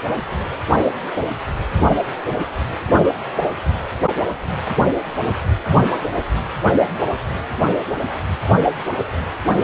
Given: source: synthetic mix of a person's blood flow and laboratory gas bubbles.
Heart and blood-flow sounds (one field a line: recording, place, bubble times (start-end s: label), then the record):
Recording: Doppler ultrasound of blood flow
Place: precordium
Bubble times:
no bubbles
From the record:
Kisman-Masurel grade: 000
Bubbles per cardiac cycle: 0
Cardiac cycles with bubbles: 0%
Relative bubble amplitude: no bubbles discernible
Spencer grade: 0 (complete lack of bubble signals)